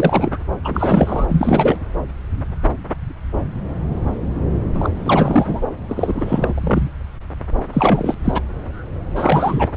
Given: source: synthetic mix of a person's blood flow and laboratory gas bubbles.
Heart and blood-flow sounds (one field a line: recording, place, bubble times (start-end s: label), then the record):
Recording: Doppler ultrasound of blood flow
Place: subclavian vein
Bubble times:
0.00-0.38 s: bubbles
0.64-1.26 s: bubbles
1.29-1.80 s: bubbles
4.74-4.90 s: bubbles
4.95-5.67 s: bubbles
5.88-6.90 s: bubbles
7.73-8.14 s: bubbles
8.24-8.41 s: bubbles
9.15-9.71 s: bubbles
From the record:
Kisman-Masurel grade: 333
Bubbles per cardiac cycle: rolling drumbeat, 9 or more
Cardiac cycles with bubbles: 50 to 99%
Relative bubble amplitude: loud (0.450 to 0.775)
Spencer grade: 3 (all of the cardiac periods contain showers or single bubble signals, but not dominating or overriding the cardiac motion signals)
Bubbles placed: anywhere in the cardiac cycle